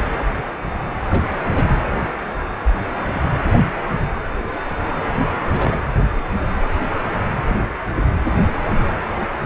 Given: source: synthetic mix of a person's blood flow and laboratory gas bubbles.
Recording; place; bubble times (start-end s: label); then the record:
Doppler ultrasound of blood flow; precordium
1.10-1.25 s: bubbles
1.56-1.63 s: bubbles
5.49-5.77 s: bubbles
7.45-7.68 s: bubbles
From the record:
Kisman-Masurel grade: 121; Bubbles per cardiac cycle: 1 to 2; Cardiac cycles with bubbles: 10 to 50%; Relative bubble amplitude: barely perceptible (0.100 to 0.250); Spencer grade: 2 (many but less than half of the cardiac periods contain bubble signals, singularly or in groups); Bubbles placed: anywhere in the cardiac cycle